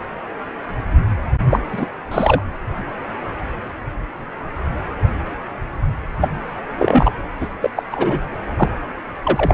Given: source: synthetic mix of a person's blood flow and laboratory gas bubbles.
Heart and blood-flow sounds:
Doppler ultrasound of blood flow; precordium
1.50-1.59 s: bubbles
1.71-1.86 s: bubbles
2.11-2.41 s: bubbles
6.21-6.29 s: bubbles
6.78-7.10 s: bubbles
7.40-7.48 s: bubbles
7.61-7.70 s: bubbles
7.76-7.83 s: bubbles
7.91-8.20 s: bubbles
8.58-8.69 s: bubbles
9.23-9.54 s: bubbles
From the record:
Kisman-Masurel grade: 233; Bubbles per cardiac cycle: several, 3 to 8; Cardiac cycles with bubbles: 50 to 99%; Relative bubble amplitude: loud (0.450 to 0.775); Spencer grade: 3 (all of the cardiac periods contain showers or single bubble signals, but not dominating or overriding the cardiac motion signals); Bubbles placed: anywhere in the cardiac cycle

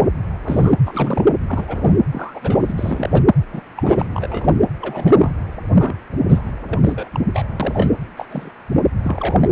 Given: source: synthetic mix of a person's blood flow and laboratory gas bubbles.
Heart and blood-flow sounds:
Doppler ultrasound of blood flow; precordium
0.00-0.08 s: bubbles
0.42-0.74 s: bubbles
0.79-0.82 s: bubbles
0.85-1.24 s: bubbles
1.47-1.93 s: bubbles
2.10-2.72 s: bubbles
2.75-3.22 s: bubbles
3.52-3.62 s: bubbles
3.77-4.54 s: bubbles
4.81-5.30 s: bubbles
5.78-5.95 s: bubbles
6.29-6.51 s: bubbles
6.70-6.79 s: bubbles
6.83-7.09 s: bubbles
7.12-7.20 s: bubbles
7.33-7.46 s: bubbles
7.59-7.92 s: bubbles
8.17-8.26 s: bubbles
8.30-8.50 s: bubbles
9.02-9.50 s: bubbles
From the record:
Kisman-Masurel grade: 242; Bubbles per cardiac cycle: several, 3 to 8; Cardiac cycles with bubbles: 100%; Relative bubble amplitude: moderate (0.250 to 0.450); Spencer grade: 3 (all of the cardiac periods contain showers or single bubble signals, but not dominating or overriding the cardiac motion signals); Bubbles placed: anywhere in the cardiac cycle

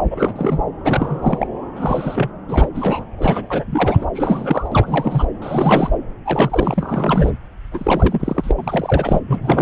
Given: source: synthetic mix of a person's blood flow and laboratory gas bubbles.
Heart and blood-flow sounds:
Doppler ultrasound of blood flow; subclavian vein
0.10-0.33 s: bubbles
0.36-0.61 s: bubbles
0.84-1.19 s: bubbles
1.22-1.47 s: bubbles
1.76-2.30 s: bubbles
2.48-2.67 s: bubbles
2.75-3.06 s: bubbles
3.18-3.48 s: bubbles
3.50-4.06 s: bubbles
4.15-4.69 s: bubbles
4.72-5.25 s: bubbles
5.42-5.90 s: bubbles
6.25-7.32 s: bubbles
7.72-8.51 s: bubbles
8.57-9.20 s: bubbles
9.27-9.62 s: bubbles
From the record:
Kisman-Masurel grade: 342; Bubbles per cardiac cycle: rolling drumbeat, 9 or more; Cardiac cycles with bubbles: 100%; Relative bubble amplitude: moderate (0.250 to 0.450); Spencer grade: 3 (all of the cardiac periods contain showers or single bubble signals, but not dominating or overriding the cardiac motion signals); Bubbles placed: anywhere in the cardiac cycle

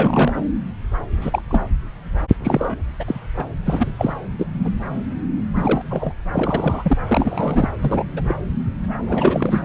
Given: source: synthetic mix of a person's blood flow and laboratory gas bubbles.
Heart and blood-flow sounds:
Doppler ultrasound of blood flow; subclavian vein
0.00-0.32 s: bubbles
1.21-1.42 s: bubbles
1.50-1.61 s: bubbles
2.43-2.82 s: bubbles
3.00-3.04 s: bubbles
3.07-3.15 s: bubbles
3.37-3.45 s: bubbles
3.65-3.87 s: bubbles
3.98-4.13 s: bubbles
4.34-4.46 s: bubbles
4.63-4.71 s: bubbles
5.56-5.82 s: bubbles
5.91-6.13 s: bubbles
6.33-6.98 s: bubbles
7.07-7.70 s: bubbles
7.81-8.04 s: bubbles
8.16-8.34 s: bubbles
9.07-9.62 s: bubbles
From the record:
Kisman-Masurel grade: 232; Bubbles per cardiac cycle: several, 3 to 8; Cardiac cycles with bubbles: 50 to 99%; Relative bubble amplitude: moderate (0.250 to 0.450); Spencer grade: 3 (all of the cardiac periods contain showers or single bubble signals, but not dominating or overriding the cardiac motion signals); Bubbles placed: anywhere in the cardiac cycle

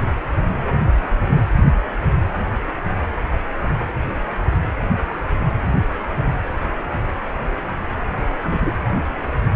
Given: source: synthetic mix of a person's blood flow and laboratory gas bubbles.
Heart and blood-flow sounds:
Doppler ultrasound of blood flow; precordium
8.42-8.73 s: bubbles
From the record:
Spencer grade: 1 (occasional bubble signal discernible with the cardiac motion signal, with majority of cardiac periods free of bubbles); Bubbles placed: anywhere in the cardiac cycle

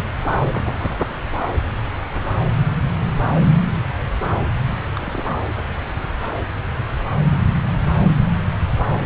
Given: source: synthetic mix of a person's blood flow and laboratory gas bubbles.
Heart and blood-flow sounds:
Doppler ultrasound of blood flow; subclavian vein
0.52-0.95 s: bubbles
4.96-5.22 s: bubbles
From the record:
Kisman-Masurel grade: 111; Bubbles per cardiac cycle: 1 to 2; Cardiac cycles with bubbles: 1 to 10%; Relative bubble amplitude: barely perceptible (0.100 to 0.250); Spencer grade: 1 (occasional bubble signal discernible with the cardiac motion signal, with majority of cardiac periods free of bubbles); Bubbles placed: anywhere in the cardiac cycle

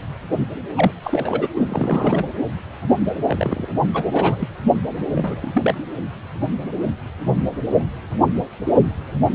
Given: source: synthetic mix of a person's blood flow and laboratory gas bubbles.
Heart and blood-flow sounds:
Doppler ultrasound of blood flow; precordium
0.75-0.92 s: bubbles
1.02-1.48 s: bubbles
1.55-2.25 s: bubbles
3.27-3.67 s: bubbles
3.93-4.05 s: bubbles
4.11-4.48 s: bubbles
4.63-4.75 s: bubbles
5.15-5.75 s: bubbles
From the record:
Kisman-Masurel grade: 222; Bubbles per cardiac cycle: several, 3 to 8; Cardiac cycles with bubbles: 10 to 50%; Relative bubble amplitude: moderate (0.250 to 0.450); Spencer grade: 2 (many but less than half of the cardiac periods contain bubble signals, singularly or in groups); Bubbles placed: anywhere in the cardiac cycle

